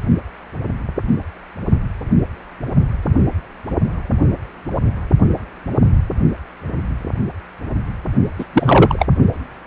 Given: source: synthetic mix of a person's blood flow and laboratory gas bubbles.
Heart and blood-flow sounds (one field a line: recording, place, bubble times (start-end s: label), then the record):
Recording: Doppler ultrasound of blood flow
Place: precordium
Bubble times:
8.38-8.45 s: bubbles
8.53-9.06 s: bubbles
From the record:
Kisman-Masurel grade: 213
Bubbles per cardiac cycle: several, 3 to 8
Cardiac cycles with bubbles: 1 to 10%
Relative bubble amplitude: loud (0.450 to 0.775)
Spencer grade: 1 (occasional bubble signal discernible with the cardiac motion signal, with majority of cardiac periods free of bubbles)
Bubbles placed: only in the low amplitude regions of the cardiac cycle